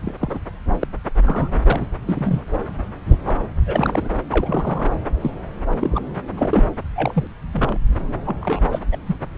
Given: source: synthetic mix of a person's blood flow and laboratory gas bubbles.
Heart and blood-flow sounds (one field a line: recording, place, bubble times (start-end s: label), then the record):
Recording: Doppler ultrasound of blood flow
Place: subclavian vein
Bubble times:
0.02-0.15 s: bubbles
0.20-0.39 s: bubbles
0.80-0.87 s: bubbles
1.25-1.49 s: bubbles
1.65-1.86 s: bubbles
2.06-2.42 s: bubbles
3.06-3.18 s: bubbles
3.25-3.37 s: bubbles
3.66-4.09 s: bubbles
4.31-4.90 s: bubbles
5.21-5.31 s: bubbles
5.80-5.99 s: bubbles
6.37-6.63 s: bubbles
6.96-7.28 s: bubbles
7.53-7.79 s: bubbles
8.26-8.36 s: bubbles
8.42-8.62 s: bubbles
8.71-8.79 s: bubbles
8.92-8.97 s: bubbles
9.06-9.15 s: bubbles
From the record:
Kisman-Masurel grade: 242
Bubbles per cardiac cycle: several, 3 to 8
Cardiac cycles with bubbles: 100%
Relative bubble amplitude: moderate (0.250 to 0.450)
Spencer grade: 3 (all of the cardiac periods contain showers or single bubble signals, but not dominating or overriding the cardiac motion signals)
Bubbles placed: anywhere in the cardiac cycle